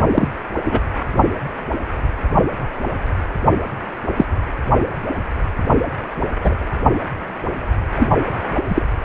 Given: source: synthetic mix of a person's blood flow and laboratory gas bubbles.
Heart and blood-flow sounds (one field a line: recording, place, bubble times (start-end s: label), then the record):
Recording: Doppler ultrasound of blood flow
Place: precordium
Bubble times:
0.14-0.28 s: bubbles
0.64-0.80 s: bubbles
4.16-4.25 s: bubbles
6.44-6.56 s: bubbles
7.95-8.09 s: bubbles
8.68-8.83 s: bubbles
From the record:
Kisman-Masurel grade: 123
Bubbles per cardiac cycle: 1 to 2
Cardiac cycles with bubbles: 10 to 50%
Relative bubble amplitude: loud (0.450 to 0.775)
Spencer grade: 2 (many but less than half of the cardiac periods contain bubble signals, singularly or in groups)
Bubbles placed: anywhere in the cardiac cycle